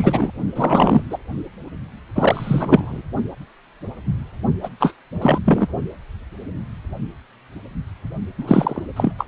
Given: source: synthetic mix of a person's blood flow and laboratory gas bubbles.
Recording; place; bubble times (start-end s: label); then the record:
Doppler ultrasound of blood flow; precordium
0.00-0.31 s: bubbles
0.55-1.02 s: bubbles
1.10-1.18 s: bubbles
2.15-3.02 s: bubbles
4.62-4.68 s: bubbles
4.80-4.93 s: bubbles
5.19-5.38 s: bubbles
5.45-5.68 s: bubbles
8.38-8.83 s: bubbles
8.96-9.13 s: bubbles
9.18-9.26 s: bubbles
From the record:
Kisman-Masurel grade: 333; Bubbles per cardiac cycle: rolling drumbeat, 9 or more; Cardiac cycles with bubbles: 50 to 99%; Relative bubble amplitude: loud (0.450 to 0.775); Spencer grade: 3 (all of the cardiac periods contain showers or single bubble signals, but not dominating or overriding the cardiac motion signals); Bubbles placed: only in the low amplitude regions of the cardiac cycle